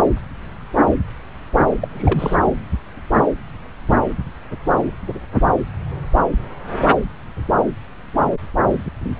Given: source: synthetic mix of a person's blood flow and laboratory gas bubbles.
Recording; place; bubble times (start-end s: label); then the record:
Doppler ultrasound of blood flow; subclavian vein
1.80-1.88 s: bubbles
1.91-2.35 s: bubbles
From the record:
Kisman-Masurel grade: 212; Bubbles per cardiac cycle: several, 3 to 8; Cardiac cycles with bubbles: 1 to 10%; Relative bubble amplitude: moderate (0.250 to 0.450); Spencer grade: 1 (occasional bubble signal discernible with the cardiac motion signal, with majority of cardiac periods free of bubbles); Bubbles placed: anywhere in the cardiac cycle